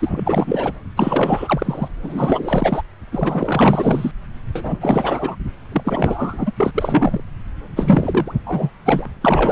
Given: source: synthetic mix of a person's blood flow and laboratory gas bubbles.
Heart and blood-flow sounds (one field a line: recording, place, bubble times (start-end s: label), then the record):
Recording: Doppler ultrasound of blood flow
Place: subclavian vein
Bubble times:
0.00-0.72 s: bubbles
0.96-1.88 s: bubbles
2.01-2.81 s: bubbles
3.11-4.12 s: bubbles
4.55-5.36 s: bubbles
5.72-6.53 s: bubbles
6.57-6.71 s: bubbles
6.74-7.22 s: bubbles
7.76-8.32 s: bubbles
8.46-8.70 s: bubbles
8.85-9.07 s: bubbles
9.21-9.52 s: bubbles
From the record:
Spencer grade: 4 (maximum detectable bubble signal sounding continuously throughout systole and diastole of every cardiac period, and overriding the amplitude of the normal cardiac signals)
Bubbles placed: anywhere in the cardiac cycle